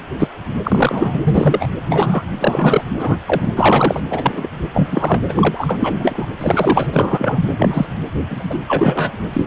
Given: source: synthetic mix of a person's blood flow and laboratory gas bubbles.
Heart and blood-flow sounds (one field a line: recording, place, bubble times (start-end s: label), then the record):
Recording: Doppler ultrasound of blood flow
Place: precordium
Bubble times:
0.20-0.28 s: bubbles
0.64-1.21 s: bubbles
1.23-1.69 s: bubbles
1.89-2.23 s: bubbles
2.34-2.83 s: bubbles
2.98-3.18 s: bubbles
3.26-3.52 s: bubbles
3.55-4.00 s: bubbles
4.10-4.47 s: bubbles
4.73-5.21 s: bubbles
5.28-5.33 s: bubbles
5.36-6.26 s: bubbles
6.39-6.86 s: bubbles
6.92-7.39 s: bubbles
7.58-7.87 s: bubbles
8.29-8.59 s: bubbles
8.67-9.12 s: bubbles
9.33-9.44 s: bubbles
From the record:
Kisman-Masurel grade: 243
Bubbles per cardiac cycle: several, 3 to 8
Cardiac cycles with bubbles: 100%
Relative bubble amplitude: loud (0.450 to 0.775)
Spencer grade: 3 (all of the cardiac periods contain showers or single bubble signals, but not dominating or overriding the cardiac motion signals)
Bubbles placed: anywhere in the cardiac cycle